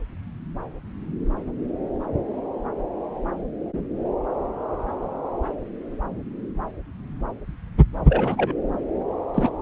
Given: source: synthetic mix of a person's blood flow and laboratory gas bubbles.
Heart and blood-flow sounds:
Doppler ultrasound of blood flow; subclavian vein
8.09-8.54 s: bubbles
9.34-9.49 s: bubbles
From the record:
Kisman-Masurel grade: 222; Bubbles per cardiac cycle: several, 3 to 8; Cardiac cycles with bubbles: 10 to 50%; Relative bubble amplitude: moderate (0.250 to 0.450); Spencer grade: 2 (many but less than half of the cardiac periods contain bubble signals, singularly or in groups); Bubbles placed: anywhere in the cardiac cycle

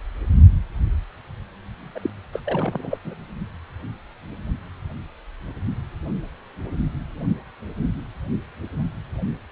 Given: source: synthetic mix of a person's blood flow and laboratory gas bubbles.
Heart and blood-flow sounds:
Doppler ultrasound of blood flow; precordium
1.95-2.10 s: bubbles
2.33-2.40 s: bubbles
2.46-2.98 s: bubbles
3.05-3.15 s: bubbles
From the record:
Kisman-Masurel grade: 211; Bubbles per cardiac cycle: several, 3 to 8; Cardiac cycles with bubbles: 1 to 10%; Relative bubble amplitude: barely perceptible (0.100 to 0.250); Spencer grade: 1 (occasional bubble signal discernible with the cardiac motion signal, with majority of cardiac periods free of bubbles); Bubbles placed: only in the low amplitude regions of the cardiac cycle

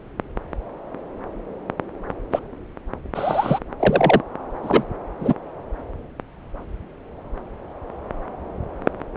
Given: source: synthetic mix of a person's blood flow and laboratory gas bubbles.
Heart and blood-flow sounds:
Doppler ultrasound of blood flow; subclavian vein
2.32-2.40 s: bubbles
3.15-3.59 s: bubbles
3.79-4.21 s: bubbles
4.63-4.83 s: bubbles
5.20-5.34 s: bubbles
From the record:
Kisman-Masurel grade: 123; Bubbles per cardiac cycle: 1 to 2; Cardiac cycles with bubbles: 10 to 50%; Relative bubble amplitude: loud (0.450 to 0.775); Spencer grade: 2 (many but less than half of the cardiac periods contain bubble signals, singularly or in groups); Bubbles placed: anywhere in the cardiac cycle

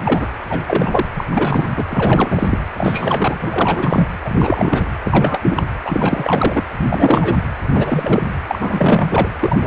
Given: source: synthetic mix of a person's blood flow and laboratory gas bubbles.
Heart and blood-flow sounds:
Doppler ultrasound of blood flow; precordium
0.05-0.29 s: bubbles
0.45-1.06 s: bubbles
1.16-1.25 s: bubbles
1.31-1.85 s: bubbles
1.90-2.58 s: bubbles
2.77-3.38 s: bubbles
3.40-4.05 s: bubbles
4.25-4.97 s: bubbles
5.04-5.63 s: bubbles
5.84-6.62 s: bubbles
6.89-7.37 s: bubbles
7.74-8.23 s: bubbles
8.47-9.29 s: bubbles
9.41-9.67 s: bubbles
From the record:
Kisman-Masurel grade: 343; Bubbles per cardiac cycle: rolling drumbeat, 9 or more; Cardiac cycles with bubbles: 100%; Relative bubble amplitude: loud (0.450 to 0.775); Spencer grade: 3 (all of the cardiac periods contain showers or single bubble signals, but not dominating or overriding the cardiac motion signals); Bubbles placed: anywhere in the cardiac cycle

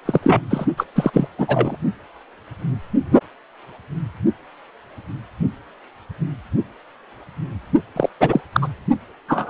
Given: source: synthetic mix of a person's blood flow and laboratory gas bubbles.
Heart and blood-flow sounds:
Doppler ultrasound of blood flow; precordium
0.05-0.20 s: bubbles
0.23-0.40 s: bubbles
0.50-0.66 s: bubbles
0.77-0.85 s: bubbles
0.95-1.10 s: bubbles
1.13-1.27 s: bubbles
1.38-1.77 s: bubbles
7.96-8.09 s: bubbles
8.20-8.41 s: bubbles
8.52-8.68 s: bubbles
9.28-9.50 s: bubbles
From the record:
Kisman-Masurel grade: 223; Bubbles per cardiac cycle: several, 3 to 8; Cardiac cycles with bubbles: 10 to 50%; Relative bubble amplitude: loud (0.450 to 0.775); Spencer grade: 2 (many but less than half of the cardiac periods contain bubble signals, singularly or in groups); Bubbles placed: only in the low amplitude regions of the cardiac cycle

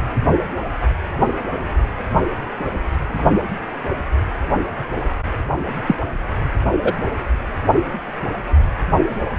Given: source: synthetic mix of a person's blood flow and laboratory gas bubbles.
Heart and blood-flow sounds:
Doppler ultrasound of blood flow; precordium
5.87-5.95 s: bubbles
6.84-6.92 s: bubbles
From the record:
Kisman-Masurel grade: 123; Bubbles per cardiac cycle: 1 to 2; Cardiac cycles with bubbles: 10 to 50%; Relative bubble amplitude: loud (0.450 to 0.775); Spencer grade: 2 (many but less than half of the cardiac periods contain bubble signals, singularly or in groups); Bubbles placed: anywhere in the cardiac cycle

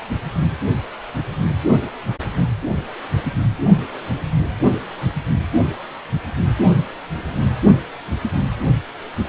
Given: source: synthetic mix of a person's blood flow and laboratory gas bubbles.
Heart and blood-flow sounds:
Doppler ultrasound of blood flow; precordium
no bubbles
From the record:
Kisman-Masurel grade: 000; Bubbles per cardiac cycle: 0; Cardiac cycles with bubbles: 0%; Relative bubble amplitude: no bubbles discernible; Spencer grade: 0 (complete lack of bubble signals)

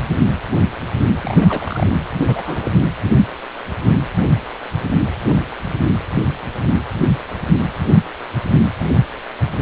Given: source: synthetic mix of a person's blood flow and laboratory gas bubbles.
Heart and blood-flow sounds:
Doppler ultrasound of blood flow; precordium
1.22-1.90 s: bubbles
2.28-2.71 s: bubbles
From the record:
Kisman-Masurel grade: 222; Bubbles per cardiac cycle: several, 3 to 8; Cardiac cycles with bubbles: 10 to 50%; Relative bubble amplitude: moderate (0.250 to 0.450); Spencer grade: 2 (many but less than half of the cardiac periods contain bubble signals, singularly or in groups); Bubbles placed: anywhere in the cardiac cycle

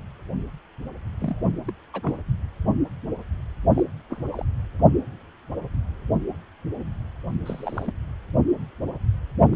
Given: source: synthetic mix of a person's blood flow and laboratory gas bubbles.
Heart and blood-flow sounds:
Doppler ultrasound of blood flow; precordium
1.21-1.49 s: bubbles
1.68-1.72 s: bubbles
1.94-2.19 s: bubbles
3.74-3.83 s: bubbles
4.10-4.22 s: bubbles
4.32-4.45 s: bubbles
7.46-7.93 s: bubbles
9.49-9.56 s: bubbles
From the record:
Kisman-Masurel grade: 221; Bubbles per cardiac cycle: several, 3 to 8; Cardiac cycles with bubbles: 10 to 50%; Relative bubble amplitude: barely perceptible (0.100 to 0.250); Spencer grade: 2 (many but less than half of the cardiac periods contain bubble signals, singularly or in groups); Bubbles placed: only in the low amplitude regions of the cardiac cycle

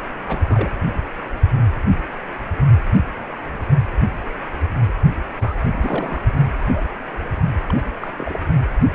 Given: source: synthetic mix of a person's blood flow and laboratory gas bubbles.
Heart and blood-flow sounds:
Doppler ultrasound of blood flow; precordium
0.22-0.70 s: bubbles
5.37-5.55 s: bubbles
5.74-6.22 s: bubbles
6.33-6.49 s: bubbles
6.58-6.85 s: bubbles
7.66-7.83 s: bubbles
8.01-8.07 s: bubbles
8.17-8.39 s: bubbles
From the record:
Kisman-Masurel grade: 221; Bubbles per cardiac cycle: several, 3 to 8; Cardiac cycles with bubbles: 10 to 50%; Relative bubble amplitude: barely perceptible (0.100 to 0.250); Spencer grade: 2 (many but less than half of the cardiac periods contain bubble signals, singularly or in groups); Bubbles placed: anywhere in the cardiac cycle

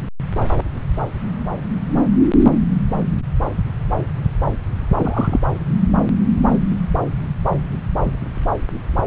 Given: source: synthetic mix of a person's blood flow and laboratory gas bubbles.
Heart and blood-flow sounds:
Doppler ultrasound of blood flow; subclavian vein
4.94-5.40 s: bubbles
From the record:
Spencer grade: 1 (occasional bubble signal discernible with the cardiac motion signal, with majority of cardiac periods free of bubbles); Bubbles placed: anywhere in the cardiac cycle

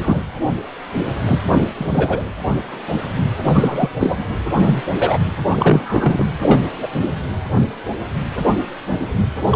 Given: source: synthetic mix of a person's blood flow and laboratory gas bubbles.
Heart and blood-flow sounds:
Doppler ultrasound of blood flow; precordium
0.00-0.24 s: bubbles
1.26-1.42 s: bubbles
1.75-2.25 s: bubbles
3.46-3.90 s: bubbles
3.99-4.32 s: bubbles
4.57-4.81 s: bubbles
4.96-5.18 s: bubbles
5.50-6.26 s: bubbles
6.42-6.61 s: bubbles
6.82-6.88 s: bubbles
7.01-7.10 s: bubbles
9.52-9.56 s: bubbles
From the record:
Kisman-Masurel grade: 233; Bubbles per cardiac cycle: several, 3 to 8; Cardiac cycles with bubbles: 50 to 99%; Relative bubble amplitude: loud (0.450 to 0.775); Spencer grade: 3 (all of the cardiac periods contain showers or single bubble signals, but not dominating or overriding the cardiac motion signals); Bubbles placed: anywhere in the cardiac cycle

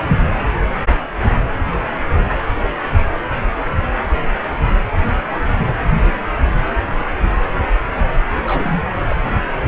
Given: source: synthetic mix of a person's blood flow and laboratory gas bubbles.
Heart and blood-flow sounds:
Doppler ultrasound of blood flow; precordium
8.46-8.82 s: bubbles
9.09-9.16 s: bubbles
9.24-9.40 s: bubbles
From the record:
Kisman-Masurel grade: 212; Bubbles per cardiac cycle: several, 3 to 8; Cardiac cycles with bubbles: 1 to 10%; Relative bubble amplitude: moderate (0.250 to 0.450); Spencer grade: 1 (occasional bubble signal discernible with the cardiac motion signal, with majority of cardiac periods free of bubbles); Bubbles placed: anywhere in the cardiac cycle

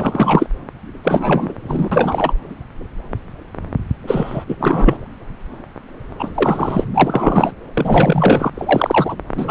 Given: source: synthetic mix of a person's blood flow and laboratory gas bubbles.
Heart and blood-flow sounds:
Doppler ultrasound of blood flow; subclavian vein
0.00-0.46 s: bubbles
1.04-1.54 s: bubbles
1.68-2.33 s: bubbles
4.07-4.45 s: bubbles
4.48-4.56 s: bubbles
4.60-4.98 s: bubbles
6.19-6.31 s: bubbles
6.35-6.85 s: bubbles
6.94-7.52 s: bubbles
7.74-8.50 s: bubbles
8.55-9.15 s: bubbles
9.35-9.51 s: bubbles
From the record:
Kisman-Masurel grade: 333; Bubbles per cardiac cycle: rolling drumbeat, 9 or more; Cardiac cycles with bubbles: 50 to 99%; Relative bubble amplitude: loud (0.450 to 0.775); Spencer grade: 3 (all of the cardiac periods contain showers or single bubble signals, but not dominating or overriding the cardiac motion signals); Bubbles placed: anywhere in the cardiac cycle

